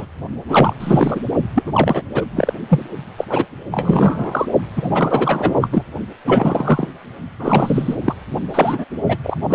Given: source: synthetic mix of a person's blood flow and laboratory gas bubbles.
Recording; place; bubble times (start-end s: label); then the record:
Doppler ultrasound of blood flow; precordium
0.00-0.05 s: bubbles
0.48-0.73 s: bubbles
0.80-1.21 s: bubbles
1.55-1.63 s: bubbles
1.66-2.04 s: bubbles
2.13-2.25 s: bubbles
2.35-2.52 s: bubbles
2.69-2.83 s: bubbles
3.17-3.25 s: bubbles
3.29-3.46 s: bubbles
3.71-4.47 s: bubbles
4.76-4.90 s: bubbles
4.94-5.69 s: bubbles
5.72-5.83 s: bubbles
6.25-6.89 s: bubbles
7.39-7.95 s: bubbles
8.04-8.14 s: bubbles
8.54-8.84 s: bubbles
9.09-9.18 s: bubbles
9.24-9.37 s: bubbles
9.48-9.55 s: bubbles
From the record:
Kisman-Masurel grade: 343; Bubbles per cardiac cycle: rolling drumbeat, 9 or more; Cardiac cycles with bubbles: 100%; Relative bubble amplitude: loud (0.450 to 0.775); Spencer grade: 3 (all of the cardiac periods contain showers or single bubble signals, but not dominating or overriding the cardiac motion signals); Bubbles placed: only in the low amplitude regions of the cardiac cycle